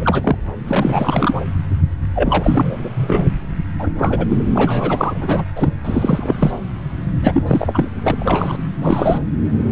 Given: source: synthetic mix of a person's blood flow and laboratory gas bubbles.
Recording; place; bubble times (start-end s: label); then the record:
Doppler ultrasound of blood flow; subclavian vein
0.00-0.36 s: bubbles
0.67-1.41 s: bubbles
2.15-2.77 s: bubbles
2.84-2.89 s: bubbles
2.94-3.26 s: bubbles
3.79-3.88 s: bubbles
3.98-4.25 s: bubbles
4.29-4.43 s: bubbles
4.54-5.45 s: bubbles
5.56-5.69 s: bubbles
5.84-6.34 s: bubbles
6.38-6.51 s: bubbles
7.22-7.43 s: bubbles
7.46-7.88 s: bubbles
8.03-8.15 s: bubbles
8.19-8.57 s: bubbles
8.79-9.18 s: bubbles
From the record:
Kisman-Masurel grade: 333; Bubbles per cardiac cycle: rolling drumbeat, 9 or more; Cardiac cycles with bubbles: 50 to 99%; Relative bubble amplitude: loud (0.450 to 0.775); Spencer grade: 3 (all of the cardiac periods contain showers or single bubble signals, but not dominating or overriding the cardiac motion signals); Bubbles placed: anywhere in the cardiac cycle